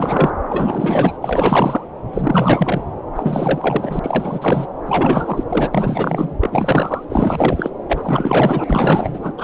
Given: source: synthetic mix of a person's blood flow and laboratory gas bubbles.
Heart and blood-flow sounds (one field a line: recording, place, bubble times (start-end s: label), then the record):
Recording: Doppler ultrasound of blood flow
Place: subclavian vein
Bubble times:
0.00-0.30 s: bubbles
0.49-1.18 s: bubbles
1.22-1.88 s: bubbles
2.13-2.83 s: bubbles
3.16-4.00 s: bubbles
4.03-4.67 s: bubbles
4.86-5.44 s: bubbles
5.49-5.70 s: bubbles
5.74-6.36 s: bubbles
6.40-7.05 s: bubbles
7.09-7.71 s: bubbles
7.88-9.33 s: bubbles
9.38-9.44 s: bubbles
From the record:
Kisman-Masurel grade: 444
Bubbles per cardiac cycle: continuous sound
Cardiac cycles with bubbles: 100%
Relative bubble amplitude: maximal (0.775 to 0.999)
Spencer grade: 4 (maximum detectable bubble signal sounding continuously throughout systole and diastole of every cardiac period, and overriding the amplitude of the normal cardiac signals)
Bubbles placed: anywhere in the cardiac cycle